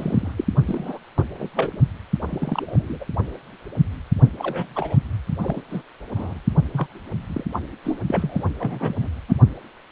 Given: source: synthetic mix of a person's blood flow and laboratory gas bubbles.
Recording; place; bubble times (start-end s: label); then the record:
Doppler ultrasound of blood flow; precordium
0.00-0.34 s: bubbles
0.37-0.45 s: bubbles
0.66-0.99 s: bubbles
1.17-1.24 s: bubbles
1.39-1.49 s: bubbles
1.55-1.76 s: bubbles
2.27-3.05 s: bubbles
4.38-4.97 s: bubbles
5.42-5.62 s: bubbles
5.70-5.82 s: bubbles
6.16-6.41 s: bubbles
6.73-6.87 s: bubbles
7.27-7.45 s: bubbles
7.53-7.60 s: bubbles
7.84-7.99 s: bubbles
8.07-8.44 s: bubbles
8.59-9.09 s: bubbles
9.28-9.34 s: bubbles
From the record:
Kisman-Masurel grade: 232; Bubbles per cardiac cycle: several, 3 to 8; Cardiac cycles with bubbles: 50 to 99%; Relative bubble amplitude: moderate (0.250 to 0.450); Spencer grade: 3 (all of the cardiac periods contain showers or single bubble signals, but not dominating or overriding the cardiac motion signals); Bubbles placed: only in the low amplitude regions of the cardiac cycle